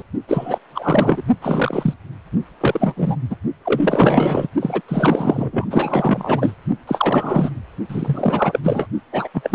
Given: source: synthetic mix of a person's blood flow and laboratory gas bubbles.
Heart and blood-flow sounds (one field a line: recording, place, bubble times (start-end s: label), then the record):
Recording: Doppler ultrasound of blood flow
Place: precordium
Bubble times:
0.00-0.02 s: bubbles
0.27-0.58 s: bubbles
0.74-1.25 s: bubbles
1.41-1.94 s: bubbles
2.60-2.94 s: bubbles
2.96-3.16 s: bubbles
3.30-3.36 s: bubbles
3.65-4.47 s: bubbles
4.61-4.81 s: bubbles
4.88-5.66 s: bubbles
5.70-6.51 s: bubbles
6.87-7.50 s: bubbles
7.89-8.60 s: bubbles
8.64-8.87 s: bubbles
9.12-9.28 s: bubbles
9.34-9.55 s: bubbles
From the record:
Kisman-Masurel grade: 444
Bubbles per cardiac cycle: continuous sound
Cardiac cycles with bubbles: 100%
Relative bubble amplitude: maximal (0.775 to 0.999)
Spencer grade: 4 (maximum detectable bubble signal sounding continuously throughout systole and diastole of every cardiac period, and overriding the amplitude of the normal cardiac signals)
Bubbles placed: only in the low amplitude regions of the cardiac cycle